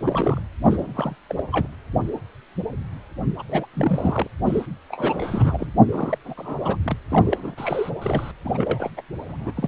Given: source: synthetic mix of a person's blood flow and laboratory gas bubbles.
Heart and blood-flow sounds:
Doppler ultrasound of blood flow; precordium
0.00-0.40 s: bubbles
0.64-1.16 s: bubbles
1.29-1.44 s: bubbles
1.52-1.67 s: bubbles
3.39-3.43 s: bubbles
3.48-3.66 s: bubbles
3.73-4.27 s: bubbles
4.46-4.66 s: bubbles
4.89-5.71 s: bubbles
5.90-6.18 s: bubbles
6.24-6.34 s: bubbles
6.37-6.77 s: bubbles
6.82-6.97 s: bubbles
7.09-7.90 s: bubbles
8.01-8.31 s: bubbles
8.45-8.90 s: bubbles
8.97-9.01 s: bubbles
9.29-9.53 s: bubbles
9.55-9.68 s: bubbles
From the record:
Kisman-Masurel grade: 332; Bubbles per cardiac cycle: rolling drumbeat, 9 or more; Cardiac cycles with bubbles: 50 to 99%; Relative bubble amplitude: moderate (0.250 to 0.450); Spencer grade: 3 (all of the cardiac periods contain showers or single bubble signals, but not dominating or overriding the cardiac motion signals); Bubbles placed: anywhere in the cardiac cycle

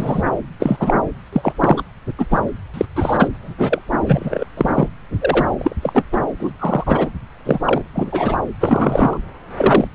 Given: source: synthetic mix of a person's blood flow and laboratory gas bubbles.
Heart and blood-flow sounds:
Doppler ultrasound of blood flow; subclavian vein
0.00-0.22 s: bubbles
0.26-0.31 s: bubbles
0.59-0.95 s: bubbles
1.32-1.53 s: bubbles
1.60-1.83 s: bubbles
2.18-2.26 s: bubbles
2.31-2.39 s: bubbles
2.74-2.86 s: bubbles
2.96-3.28 s: bubbles
3.43-3.54 s: bubbles
3.58-3.82 s: bubbles
4.06-4.46 s: bubbles
4.57-4.88 s: bubbles
5.21-5.46 s: bubbles
5.58-5.75 s: bubbles
5.82-6.04 s: bubbles
6.12-6.19 s: bubbles
6.40-6.54 s: bubbles
6.59-7.10 s: bubbles
7.46-7.59 s: bubbles
7.65-7.82 s: bubbles
7.95-8.37 s: bubbles
8.60-9.18 s: bubbles
9.56-9.88 s: bubbles
From the record:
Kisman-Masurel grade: 243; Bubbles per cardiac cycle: several, 3 to 8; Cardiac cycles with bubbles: 100%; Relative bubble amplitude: loud (0.450 to 0.775); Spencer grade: 3 (all of the cardiac periods contain showers or single bubble signals, but not dominating or overriding the cardiac motion signals); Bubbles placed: anywhere in the cardiac cycle

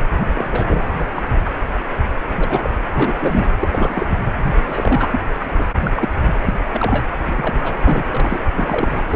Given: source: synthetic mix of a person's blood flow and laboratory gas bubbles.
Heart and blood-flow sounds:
Doppler ultrasound of blood flow; precordium
0.13-0.87 s: bubbles
0.98-1.04 s: bubbles
1.15-1.22 s: bubbles
2.28-2.71 s: bubbles
2.93-3.14 s: bubbles
3.19-3.50 s: bubbles
3.60-4.06 s: bubbles
4.10-4.18 s: bubbles
4.66-5.08 s: bubbles
5.12-5.20 s: bubbles
5.39-5.47 s: bubbles
5.59-5.65 s: bubbles
5.79-5.91 s: bubbles
5.96-6.08 s: bubbles
6.46-6.56 s: bubbles
6.74-7.07 s: bubbles
7.25-7.57 s: bubbles
7.63-7.74 s: bubbles
7.80-8.04 s: bubbles
8.10-8.38 s: bubbles
8.54-9.04 s: bubbles
9.09-9.15 s: bubbles
From the record:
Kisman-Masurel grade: 232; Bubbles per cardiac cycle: several, 3 to 8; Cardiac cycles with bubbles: 50 to 99%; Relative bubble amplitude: moderate (0.250 to 0.450); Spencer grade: 3 (all of the cardiac periods contain showers or single bubble signals, but not dominating or overriding the cardiac motion signals); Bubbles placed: anywhere in the cardiac cycle

